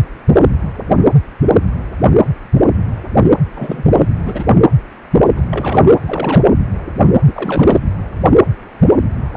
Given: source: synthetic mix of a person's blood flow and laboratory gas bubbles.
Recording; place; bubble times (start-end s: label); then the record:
Doppler ultrasound of blood flow; precordium
3.55-4.06 s: bubbles
4.24-4.46 s: bubbles
5.35-5.88 s: bubbles
6.03-6.51 s: bubbles
7.27-7.79 s: bubbles
From the record:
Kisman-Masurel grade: 222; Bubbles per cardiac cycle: several, 3 to 8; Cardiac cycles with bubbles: 10 to 50%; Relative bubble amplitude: moderate (0.250 to 0.450); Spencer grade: 2 (many but less than half of the cardiac periods contain bubble signals, singularly or in groups); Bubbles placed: anywhere in the cardiac cycle